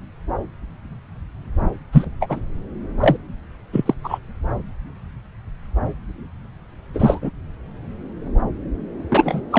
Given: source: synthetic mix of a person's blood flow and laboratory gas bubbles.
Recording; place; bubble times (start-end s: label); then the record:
Doppler ultrasound of blood flow; subclavian vein
1.92-2.08 s: bubbles
2.21-2.40 s: bubbles
3.00-3.17 s: bubbles
3.72-3.94 s: bubbles
4.04-4.18 s: bubbles
6.93-7.30 s: bubbles
9.11-9.42 s: bubbles
9.51-9.59 s: bubbles
From the record:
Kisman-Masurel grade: 233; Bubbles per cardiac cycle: several, 3 to 8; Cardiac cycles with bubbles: 50 to 99%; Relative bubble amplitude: loud (0.450 to 0.775); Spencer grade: 3 (all of the cardiac periods contain showers or single bubble signals, but not dominating or overriding the cardiac motion signals); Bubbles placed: anywhere in the cardiac cycle